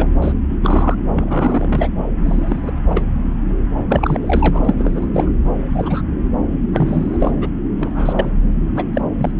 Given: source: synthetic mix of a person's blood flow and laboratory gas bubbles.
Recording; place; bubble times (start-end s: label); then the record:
Doppler ultrasound of blood flow; subclavian vein
0.00-0.07 s: bubbles
0.22-0.32 s: bubbles
0.50-0.56 s: bubbles
0.61-0.95 s: bubbles
1.14-1.90 s: bubbles
2.25-2.71 s: bubbles
2.90-3.04 s: bubbles
3.89-4.18 s: bubbles
4.21-4.75 s: bubbles
4.79-5.33 s: bubbles
5.75-6.02 s: bubbles
6.73-7.33 s: bubbles
7.40-7.48 s: bubbles
7.79-8.30 s: bubbles
8.74-8.85 s: bubbles
8.93-9.01 s: bubbles
9.17-9.31 s: bubbles
From the record:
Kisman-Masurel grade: 242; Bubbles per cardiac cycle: several, 3 to 8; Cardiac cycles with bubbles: 100%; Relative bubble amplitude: moderate (0.250 to 0.450); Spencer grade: 3 (all of the cardiac periods contain showers or single bubble signals, but not dominating or overriding the cardiac motion signals); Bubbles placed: anywhere in the cardiac cycle